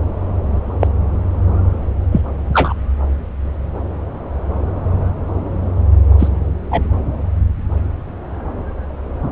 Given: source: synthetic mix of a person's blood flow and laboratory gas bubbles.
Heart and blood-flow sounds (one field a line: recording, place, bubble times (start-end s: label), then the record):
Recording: Doppler ultrasound of blood flow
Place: subclavian vein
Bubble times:
0.80-0.87 s: bubbles
2.12-2.21 s: bubbles
2.53-2.74 s: bubbles
6.18-6.28 s: bubbles
6.71-6.83 s: bubbles
From the record:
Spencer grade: 2 (many but less than half of the cardiac periods contain bubble signals, singularly or in groups)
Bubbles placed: anywhere in the cardiac cycle